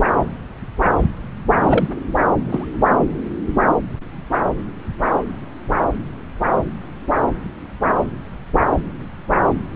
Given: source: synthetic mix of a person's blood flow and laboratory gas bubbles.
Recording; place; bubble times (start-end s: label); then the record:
Doppler ultrasound of blood flow; subclavian vein
1.62-1.87 s: bubbles
2.49-2.65 s: bubbles
From the record:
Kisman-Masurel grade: 212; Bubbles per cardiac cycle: several, 3 to 8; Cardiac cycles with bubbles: 1 to 10%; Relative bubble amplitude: moderate (0.250 to 0.450); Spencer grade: 1 (occasional bubble signal discernible with the cardiac motion signal, with majority of cardiac periods free of bubbles); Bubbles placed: anywhere in the cardiac cycle